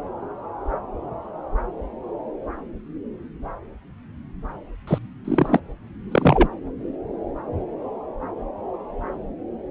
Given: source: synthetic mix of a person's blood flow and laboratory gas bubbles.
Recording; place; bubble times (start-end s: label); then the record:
Doppler ultrasound of blood flow; subclavian vein
4.87-4.99 s: bubbles
5.25-5.60 s: bubbles
6.12-6.48 s: bubbles
From the record:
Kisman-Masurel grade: 212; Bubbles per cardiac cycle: several, 3 to 8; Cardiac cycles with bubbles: 1 to 10%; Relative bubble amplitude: moderate (0.250 to 0.450); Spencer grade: 1 (occasional bubble signal discernible with the cardiac motion signal, with majority of cardiac periods free of bubbles); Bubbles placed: anywhere in the cardiac cycle